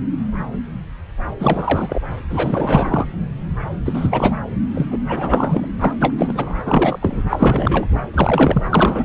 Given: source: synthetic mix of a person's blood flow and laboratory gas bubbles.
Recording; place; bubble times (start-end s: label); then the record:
Doppler ultrasound of blood flow; subclavian vein
1.40-1.99 s: bubbles
2.29-3.06 s: bubbles
3.85-4.37 s: bubbles
4.74-4.86 s: bubbles
4.91-4.98 s: bubbles
5.08-5.68 s: bubbles
5.79-5.93 s: bubbles
6.00-6.14 s: bubbles
6.17-6.62 s: bubbles
6.66-7.21 s: bubbles
7.29-7.87 s: bubbles
8.13-9.05 s: bubbles
From the record:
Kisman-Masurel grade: 333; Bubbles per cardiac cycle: rolling drumbeat, 9 or more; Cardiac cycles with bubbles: 50 to 99%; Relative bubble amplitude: loud (0.450 to 0.775); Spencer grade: 3 (all of the cardiac periods contain showers or single bubble signals, but not dominating or overriding the cardiac motion signals); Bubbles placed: anywhere in the cardiac cycle